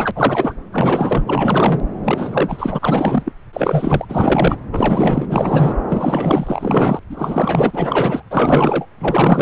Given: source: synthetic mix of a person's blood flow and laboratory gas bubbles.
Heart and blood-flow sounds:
Doppler ultrasound of blood flow; subclavian vein
0.00-0.11 s: bubbles
0.15-0.54 s: bubbles
0.72-1.23 s: bubbles
1.26-1.81 s: bubbles
2.04-3.32 s: bubbles
3.53-4.05 s: bubbles
4.08-4.60 s: bubbles
4.71-5.26 s: bubbles
5.29-5.76 s: bubbles
5.89-7.00 s: bubbles
7.09-7.71 s: bubbles
7.73-8.22 s: bubbles
8.30-8.86 s: bubbles
8.98-9.42 s: bubbles
From the record:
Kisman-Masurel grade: 444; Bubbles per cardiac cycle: continuous sound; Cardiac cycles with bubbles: 100%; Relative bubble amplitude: maximal (0.775 to 0.999); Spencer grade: 4 (maximum detectable bubble signal sounding continuously throughout systole and diastole of every cardiac period, and overriding the amplitude of the normal cardiac signals); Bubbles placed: anywhere in the cardiac cycle

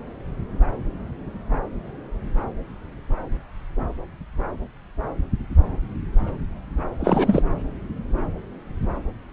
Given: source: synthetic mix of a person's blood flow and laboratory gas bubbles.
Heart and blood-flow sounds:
Doppler ultrasound of blood flow; subclavian vein
7.00-7.42 s: bubbles
From the record:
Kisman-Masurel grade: 213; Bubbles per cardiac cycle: several, 3 to 8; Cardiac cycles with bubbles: 1 to 10%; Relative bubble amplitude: loud (0.450 to 0.775); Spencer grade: 1 (occasional bubble signal discernible with the cardiac motion signal, with majority of cardiac periods free of bubbles); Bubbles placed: anywhere in the cardiac cycle

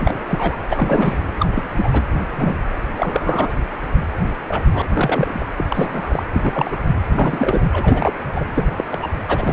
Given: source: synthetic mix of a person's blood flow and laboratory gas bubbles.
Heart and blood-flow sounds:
Doppler ultrasound of blood flow; precordium
0.00-0.19 s: bubbles
0.27-0.59 s: bubbles
0.69-1.27 s: bubbles
1.39-1.47 s: bubbles
1.55-1.64 s: bubbles
1.76-1.89 s: bubbles
1.93-2.02 s: bubbles
2.37-2.58 s: bubbles
2.98-3.52 s: bubbles
4.47-4.63 s: bubbles
4.72-4.82 s: bubbles
4.94-5.46 s: bubbles
5.57-5.66 s: bubbles
5.69-6.23 s: bubbles
6.33-6.76 s: bubbles
7.11-7.62 s: bubbles
7.72-8.12 s: bubbles
8.32-8.44 s: bubbles
8.54-8.84 s: bubbles
8.91-8.98 s: bubbles
9.02-9.09 s: bubbles
9.28-9.53 s: bubbles
From the record:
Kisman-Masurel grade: 242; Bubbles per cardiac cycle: several, 3 to 8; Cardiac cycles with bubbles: 100%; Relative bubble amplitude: moderate (0.250 to 0.450); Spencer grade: 3 (all of the cardiac periods contain showers or single bubble signals, but not dominating or overriding the cardiac motion signals); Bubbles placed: anywhere in the cardiac cycle

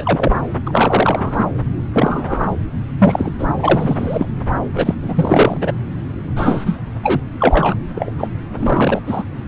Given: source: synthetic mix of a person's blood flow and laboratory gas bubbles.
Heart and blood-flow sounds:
Doppler ultrasound of blood flow; subclavian vein
0.00-0.37 s: bubbles
0.66-1.46 s: bubbles
1.93-2.48 s: bubbles
2.98-3.32 s: bubbles
3.38-3.47 s: bubbles
3.57-4.27 s: bubbles
4.75-4.95 s: bubbles
5.03-5.58 s: bubbles
5.61-5.71 s: bubbles
6.36-6.78 s: bubbles
7.03-7.21 s: bubbles
7.39-7.75 s: bubbles
7.95-8.11 s: bubbles
8.19-8.29 s: bubbles
8.58-9.00 s: bubbles
9.07-9.23 s: bubbles
From the record:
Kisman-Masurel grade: 243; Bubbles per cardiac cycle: several, 3 to 8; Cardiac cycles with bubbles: 100%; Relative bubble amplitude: loud (0.450 to 0.775); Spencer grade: 3 (all of the cardiac periods contain showers or single bubble signals, but not dominating or overriding the cardiac motion signals); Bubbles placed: anywhere in the cardiac cycle

